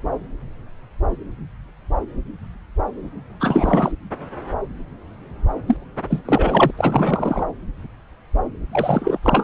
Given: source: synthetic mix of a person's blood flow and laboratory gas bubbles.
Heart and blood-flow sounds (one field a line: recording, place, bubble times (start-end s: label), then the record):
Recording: Doppler ultrasound of blood flow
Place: subclavian vein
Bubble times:
3.40-3.92 s: bubbles
5.67-5.77 s: bubbles
6.10-6.22 s: bubbles
6.25-6.71 s: bubbles
6.77-7.43 s: bubbles
8.72-9.18 s: bubbles
9.22-9.43 s: bubbles
From the record:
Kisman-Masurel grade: 332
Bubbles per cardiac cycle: rolling drumbeat, 9 or more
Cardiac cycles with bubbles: 50 to 99%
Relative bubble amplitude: moderate (0.250 to 0.450)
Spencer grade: 3 (all of the cardiac periods contain showers or single bubble signals, but not dominating or overriding the cardiac motion signals)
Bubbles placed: anywhere in the cardiac cycle